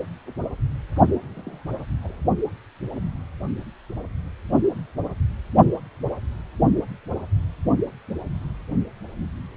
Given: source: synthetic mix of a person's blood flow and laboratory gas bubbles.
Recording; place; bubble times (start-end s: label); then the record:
Doppler ultrasound of blood flow; precordium
1.34-1.83 s: bubbles
2.03-2.15 s: bubbles
From the record:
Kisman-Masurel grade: 121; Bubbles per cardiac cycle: 1 to 2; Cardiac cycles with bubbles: 10 to 50%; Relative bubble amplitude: barely perceptible (0.100 to 0.250); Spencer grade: 2 (many but less than half of the cardiac periods contain bubble signals, singularly or in groups); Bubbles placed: only in the low amplitude regions of the cardiac cycle